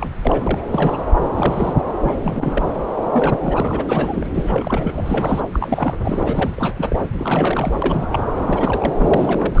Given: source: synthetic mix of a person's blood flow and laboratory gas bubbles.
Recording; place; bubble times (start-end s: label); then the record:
Doppler ultrasound of blood flow; subclavian vein
0.00-0.09 s: bubbles
0.21-0.66 s: bubbles
0.70-1.04 s: bubbles
1.35-1.73 s: bubbles
2.02-2.17 s: bubbles
2.23-2.68 s: bubbles
3.04-3.09 s: bubbles
3.12-3.38 s: bubbles
3.42-4.27 s: bubbles
4.34-4.93 s: bubbles
4.96-5.41 s: bubbles
5.53-5.94 s: bubbles
6.04-6.98 s: bubbles
7.19-7.75 s: bubbles
7.82-8.25 s: bubbles
8.36-8.94 s: bubbles
8.98-9.60 s: bubbles
From the record:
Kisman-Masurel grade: 342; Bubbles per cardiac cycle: rolling drumbeat, 9 or more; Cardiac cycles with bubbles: 100%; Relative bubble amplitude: moderate (0.250 to 0.450); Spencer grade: 3 (all of the cardiac periods contain showers or single bubble signals, but not dominating or overriding the cardiac motion signals); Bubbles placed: anywhere in the cardiac cycle